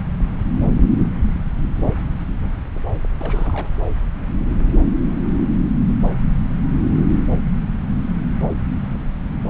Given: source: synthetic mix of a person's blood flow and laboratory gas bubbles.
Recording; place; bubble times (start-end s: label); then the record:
Doppler ultrasound of blood flow; subclavian vein
3.17-3.69 s: bubbles
From the record:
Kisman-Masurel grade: 211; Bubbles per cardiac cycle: several, 3 to 8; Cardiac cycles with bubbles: 1 to 10%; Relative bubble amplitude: barely perceptible (0.100 to 0.250); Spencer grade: 1 (occasional bubble signal discernible with the cardiac motion signal, with majority of cardiac periods free of bubbles); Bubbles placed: anywhere in the cardiac cycle